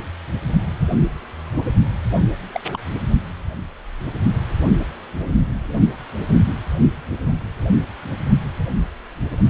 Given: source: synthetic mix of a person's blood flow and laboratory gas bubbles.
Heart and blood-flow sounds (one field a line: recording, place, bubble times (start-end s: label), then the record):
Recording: Doppler ultrasound of blood flow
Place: precordium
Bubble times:
2.52-2.61 s: bubbles
2.72-2.78 s: bubbles
From the record:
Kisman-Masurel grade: 111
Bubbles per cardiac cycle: 1 to 2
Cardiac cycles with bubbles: 1 to 10%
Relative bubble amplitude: barely perceptible (0.100 to 0.250)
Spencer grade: 1 (occasional bubble signal discernible with the cardiac motion signal, with majority of cardiac periods free of bubbles)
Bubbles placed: anywhere in the cardiac cycle